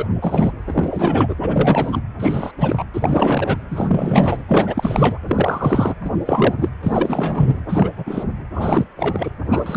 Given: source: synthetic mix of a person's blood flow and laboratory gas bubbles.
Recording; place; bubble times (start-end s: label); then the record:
Doppler ultrasound of blood flow; precordium
0.00-0.05 s: bubbles
0.21-0.51 s: bubbles
0.67-1.35 s: bubbles
1.40-2.01 s: bubbles
2.19-2.52 s: bubbles
2.59-2.83 s: bubbles
2.94-3.57 s: bubbles
3.71-4.38 s: bubbles
4.48-5.18 s: bubbles
5.27-5.94 s: bubbles
6.04-6.11 s: bubbles
6.25-6.54 s: bubbles
6.57-6.69 s: bubbles
6.82-7.62 s: bubbles
7.69-7.90 s: bubbles
7.97-8.24 s: bubbles
8.54-8.87 s: bubbles
8.95-9.33 s: bubbles
9.48-9.77 s: bubbles
From the record:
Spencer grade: 3 (all of the cardiac periods contain showers or single bubble signals, but not dominating or overriding the cardiac motion signals); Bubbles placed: anywhere in the cardiac cycle